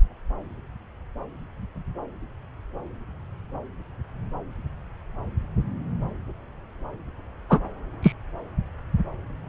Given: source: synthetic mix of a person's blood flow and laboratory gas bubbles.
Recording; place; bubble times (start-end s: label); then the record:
Doppler ultrasound of blood flow; subclavian vein
7.50-7.60 s: bubbles
8.03-8.12 s: bubbles
From the record:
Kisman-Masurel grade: 113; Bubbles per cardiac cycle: 1 to 2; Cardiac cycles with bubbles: 1 to 10%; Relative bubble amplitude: loud (0.450 to 0.775); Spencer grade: 1 (occasional bubble signal discernible with the cardiac motion signal, with majority of cardiac periods free of bubbles); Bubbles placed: anywhere in the cardiac cycle